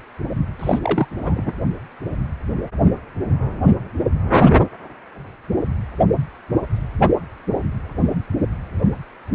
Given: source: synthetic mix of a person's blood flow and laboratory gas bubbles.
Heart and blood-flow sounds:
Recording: Doppler ultrasound of blood flow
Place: precordium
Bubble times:
0.59-0.79 s: bubbles
0.81-1.08 s: bubbles
1.23-1.53 s: bubbles
From the record:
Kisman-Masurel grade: 212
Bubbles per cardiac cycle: several, 3 to 8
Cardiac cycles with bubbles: 1 to 10%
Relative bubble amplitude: moderate (0.250 to 0.450)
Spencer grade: 1 (occasional bubble signal discernible with the cardiac motion signal, with majority of cardiac periods free of bubbles)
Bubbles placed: anywhere in the cardiac cycle

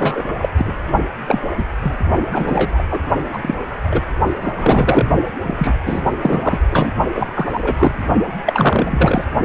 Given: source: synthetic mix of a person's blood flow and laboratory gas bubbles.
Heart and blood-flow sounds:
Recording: Doppler ultrasound of blood flow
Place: precordium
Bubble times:
0.00-0.22 s: bubbles
0.38-0.49 s: bubbles
0.57-0.74 s: bubbles
1.27-1.40 s: bubbles
1.57-1.65 s: bubbles
1.83-1.95 s: bubbles
2.31-2.83 s: bubbles
2.91-3.01 s: bubbles
3.33-3.39 s: bubbles
3.42-3.55 s: bubbles
3.83-4.01 s: bubbles
4.42-5.08 s: bubbles
5.43-5.74 s: bubbles
5.85-6.02 s: bubbles
6.21-6.61 s: bubbles
6.71-6.92 s: bubbles
7.13-7.31 s: bubbles
7.35-7.97 s: bubbles
8.46-9.24 s: bubbles
From the record:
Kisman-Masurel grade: 243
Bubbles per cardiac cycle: several, 3 to 8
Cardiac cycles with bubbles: 100%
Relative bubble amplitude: loud (0.450 to 0.775)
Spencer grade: 3 (all of the cardiac periods contain showers or single bubble signals, but not dominating or overriding the cardiac motion signals)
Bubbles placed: only in the low amplitude regions of the cardiac cycle

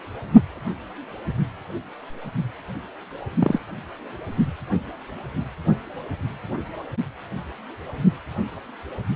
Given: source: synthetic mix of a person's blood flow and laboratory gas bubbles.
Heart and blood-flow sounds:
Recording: Doppler ultrasound of blood flow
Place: precordium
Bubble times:
3.39-3.59 s: bubbles
From the record:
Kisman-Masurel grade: 112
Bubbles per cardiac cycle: 1 to 2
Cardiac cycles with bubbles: 1 to 10%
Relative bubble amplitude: moderate (0.250 to 0.450)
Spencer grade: 1 (occasional bubble signal discernible with the cardiac motion signal, with majority of cardiac periods free of bubbles)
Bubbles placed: only in the low amplitude regions of the cardiac cycle

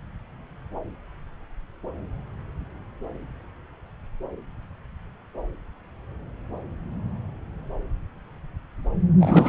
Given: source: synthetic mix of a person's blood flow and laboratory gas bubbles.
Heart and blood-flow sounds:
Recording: Doppler ultrasound of blood flow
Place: subclavian vein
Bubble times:
9.20-9.49 s: bubbles
From the record:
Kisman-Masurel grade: 213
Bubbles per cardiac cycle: several, 3 to 8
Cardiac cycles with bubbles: 1 to 10%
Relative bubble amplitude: loud (0.450 to 0.775)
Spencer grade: 1 (occasional bubble signal discernible with the cardiac motion signal, with majority of cardiac periods free of bubbles)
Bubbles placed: anywhere in the cardiac cycle

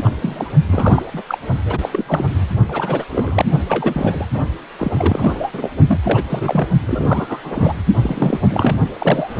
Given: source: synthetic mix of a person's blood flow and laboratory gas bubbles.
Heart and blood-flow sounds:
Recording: Doppler ultrasound of blood flow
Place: precordium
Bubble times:
0.00-0.10 s: bubbles
0.22-0.49 s: bubbles
0.68-1.03 s: bubbles
1.14-1.24 s: bubbles
1.27-1.38 s: bubbles
1.65-1.89 s: bubbles
1.92-2.27 s: bubbles
2.68-3.05 s: bubbles
3.10-3.46 s: bubbles
3.68-4.25 s: bubbles
4.33-4.41 s: bubbles
4.79-5.51 s: bubbles
5.54-5.70 s: bubbles
5.88-6.00 s: bubbles
6.04-6.23 s: bubbles
6.29-6.68 s: bubbles
6.87-7.74 s: bubbles
8.02-8.78 s: bubbles
8.93-9.40 s: bubbles
From the record:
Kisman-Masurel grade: 343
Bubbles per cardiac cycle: rolling drumbeat, 9 or more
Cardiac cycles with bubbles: 100%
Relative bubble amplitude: loud (0.450 to 0.775)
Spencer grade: 3 (all of the cardiac periods contain showers or single bubble signals, but not dominating or overriding the cardiac motion signals)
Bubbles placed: only in the low amplitude regions of the cardiac cycle

